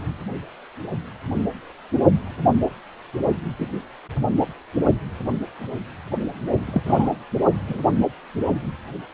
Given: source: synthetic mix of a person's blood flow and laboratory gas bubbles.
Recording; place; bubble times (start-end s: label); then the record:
Doppler ultrasound of blood flow; precordium
3.59-3.67 s: bubbles
6.67-6.81 s: bubbles
6.85-7.08 s: bubbles
7.69-7.82 s: bubbles
From the record:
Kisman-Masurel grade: 122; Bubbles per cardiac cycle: 1 to 2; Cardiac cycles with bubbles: 10 to 50%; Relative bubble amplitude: moderate (0.250 to 0.450); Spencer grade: 2 (many but less than half of the cardiac periods contain bubble signals, singularly or in groups); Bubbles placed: only in the low amplitude regions of the cardiac cycle